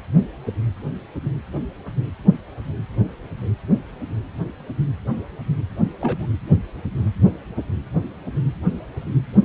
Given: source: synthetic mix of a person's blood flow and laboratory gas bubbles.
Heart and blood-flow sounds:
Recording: Doppler ultrasound of blood flow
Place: precordium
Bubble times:
6.01-6.26 s: bubbles
From the record:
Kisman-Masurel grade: 211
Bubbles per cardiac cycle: several, 3 to 8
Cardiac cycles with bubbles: 1 to 10%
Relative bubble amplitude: barely perceptible (0.100 to 0.250)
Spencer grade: 1 (occasional bubble signal discernible with the cardiac motion signal, with majority of cardiac periods free of bubbles)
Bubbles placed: anywhere in the cardiac cycle

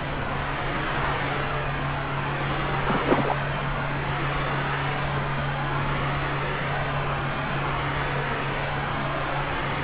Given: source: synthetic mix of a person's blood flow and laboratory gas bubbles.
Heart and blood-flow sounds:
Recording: Doppler ultrasound of blood flow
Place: subclavian vein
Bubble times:
2.86-3.34 s: bubbles
From the record:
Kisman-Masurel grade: 213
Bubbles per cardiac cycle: several, 3 to 8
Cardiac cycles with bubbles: 1 to 10%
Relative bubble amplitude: loud (0.450 to 0.775)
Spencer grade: 1 (occasional bubble signal discernible with the cardiac motion signal, with majority of cardiac periods free of bubbles)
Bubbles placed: anywhere in the cardiac cycle

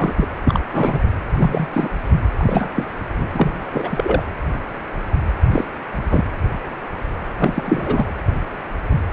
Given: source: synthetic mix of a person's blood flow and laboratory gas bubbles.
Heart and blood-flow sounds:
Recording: Doppler ultrasound of blood flow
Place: precordium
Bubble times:
0.00-0.15 s: bubbles
0.17-0.27 s: bubbles
0.45-0.60 s: bubbles
0.73-1.02 s: bubbles
1.38-1.68 s: bubbles
1.73-1.89 s: bubbles
2.37-2.69 s: bubbles
2.76-2.85 s: bubbles
3.18-3.29 s: bubbles
3.33-3.58 s: bubbles
3.65-4.23 s: bubbles
5.48-5.65 s: bubbles
6.10-6.24 s: bubbles
7.40-8.12 s: bubbles
From the record:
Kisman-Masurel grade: 233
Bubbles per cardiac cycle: several, 3 to 8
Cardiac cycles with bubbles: 50 to 99%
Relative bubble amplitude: loud (0.450 to 0.775)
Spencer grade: 3 (all of the cardiac periods contain showers or single bubble signals, but not dominating or overriding the cardiac motion signals)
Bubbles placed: anywhere in the cardiac cycle

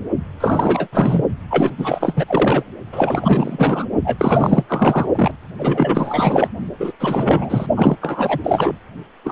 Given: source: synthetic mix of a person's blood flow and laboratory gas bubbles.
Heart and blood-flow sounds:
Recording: Doppler ultrasound of blood flow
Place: precordium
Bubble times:
0.40-0.87 s: bubbles
0.92-1.23 s: bubbles
1.50-1.70 s: bubbles
1.77-2.25 s: bubbles
2.27-2.63 s: bubbles
2.92-3.86 s: bubbles
4.04-4.63 s: bubbles
4.68-5.08 s: bubbles
5.15-5.31 s: bubbles
5.58-6.49 s: bubbles
6.79-6.92 s: bubbles
7.00-7.67 s: bubbles
7.75-7.96 s: bubbles
8.01-8.40 s: bubbles
8.44-8.78 s: bubbles
9.24-9.32 s: bubbles
From the record:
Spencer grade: 4 (maximum detectable bubble signal sounding continuously throughout systole and diastole of every cardiac period, and overriding the amplitude of the normal cardiac signals)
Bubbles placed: only in the low amplitude regions of the cardiac cycle

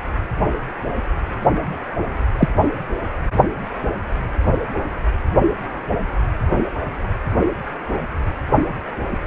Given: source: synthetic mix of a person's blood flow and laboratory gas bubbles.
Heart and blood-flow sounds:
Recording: Doppler ultrasound of blood flow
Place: precordium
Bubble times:
2.37-2.48 s: bubbles
From the record:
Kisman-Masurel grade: 113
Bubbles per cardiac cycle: 1 to 2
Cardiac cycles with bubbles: 1 to 10%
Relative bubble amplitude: loud (0.450 to 0.775)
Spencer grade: 1 (occasional bubble signal discernible with the cardiac motion signal, with majority of cardiac periods free of bubbles)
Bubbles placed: anywhere in the cardiac cycle

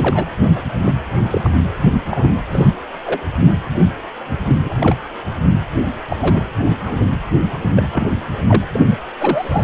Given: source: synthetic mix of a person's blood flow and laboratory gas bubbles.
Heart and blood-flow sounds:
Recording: Doppler ultrasound of blood flow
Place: precordium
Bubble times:
0.00-0.25 s: bubbles
0.56-0.63 s: bubbles
0.84-0.92 s: bubbles
1.30-1.50 s: bubbles
2.10-2.34 s: bubbles
2.52-2.69 s: bubbles
3.06-3.21 s: bubbles
4.48-4.55 s: bubbles
4.64-4.74 s: bubbles
4.79-4.96 s: bubbles
6.08-6.41 s: bubbles
6.69-6.75 s: bubbles
6.85-7.04 s: bubbles
7.76-7.88 s: bubbles
7.93-8.10 s: bubbles
8.47-8.62 s: bubbles
8.72-8.97 s: bubbles
9.20-9.64 s: bubbles
From the record:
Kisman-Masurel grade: 232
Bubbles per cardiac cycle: several, 3 to 8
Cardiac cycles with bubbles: 50 to 99%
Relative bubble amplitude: moderate (0.250 to 0.450)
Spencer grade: 3 (all of the cardiac periods contain showers or single bubble signals, but not dominating or overriding the cardiac motion signals)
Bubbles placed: anywhere in the cardiac cycle

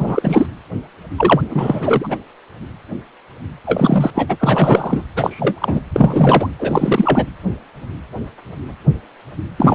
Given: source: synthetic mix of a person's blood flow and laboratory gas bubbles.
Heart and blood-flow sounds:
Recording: Doppler ultrasound of blood flow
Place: precordium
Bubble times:
0.00-0.47 s: bubbles
1.18-1.42 s: bubbles
1.50-2.17 s: bubbles
3.66-4.10 s: bubbles
4.15-4.36 s: bubbles
4.39-5.04 s: bubbles
5.16-5.81 s: bubbles
5.93-6.49 s: bubbles
6.59-7.26 s: bubbles
9.58-9.75 s: bubbles
From the record:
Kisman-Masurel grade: 333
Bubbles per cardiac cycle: rolling drumbeat, 9 or more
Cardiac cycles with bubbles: 50 to 99%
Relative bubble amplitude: loud (0.450 to 0.775)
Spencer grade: 3 (all of the cardiac periods contain showers or single bubble signals, but not dominating or overriding the cardiac motion signals)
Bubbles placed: anywhere in the cardiac cycle

